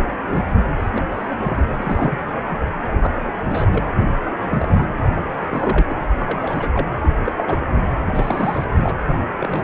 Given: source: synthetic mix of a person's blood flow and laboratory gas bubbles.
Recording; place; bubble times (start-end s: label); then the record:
Doppler ultrasound of blood flow; precordium
0.07-0.19 s: bubbles
0.24-0.42 s: bubbles
0.75-0.90 s: bubbles
0.95-1.05 s: bubbles
1.11-1.67 s: bubbles
1.72-2.17 s: bubbles
2.44-2.58 s: bubbles
2.92-3.15 s: bubbles
3.49-3.91 s: bubbles
3.96-4.12 s: bubbles
4.30-4.37 s: bubbles
4.40-4.87 s: bubbles
5.15-5.86 s: bubbles
5.88-5.96 s: bubbles
6.11-6.13 s: bubbles
6.20-6.70 s: bubbles
6.74-6.88 s: bubbles
7.04-7.13 s: bubbles
7.25-7.33 s: bubbles
7.37-7.66 s: bubbles
8.10-8.64 s: bubbles
8.77-8.94 s: bubbles
8.98-9.64 s: bubbles
From the record:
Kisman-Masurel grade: 242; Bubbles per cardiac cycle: several, 3 to 8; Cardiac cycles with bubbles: 100%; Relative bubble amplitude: moderate (0.250 to 0.450); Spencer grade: 3 (all of the cardiac periods contain showers or single bubble signals, but not dominating or overriding the cardiac motion signals); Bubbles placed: anywhere in the cardiac cycle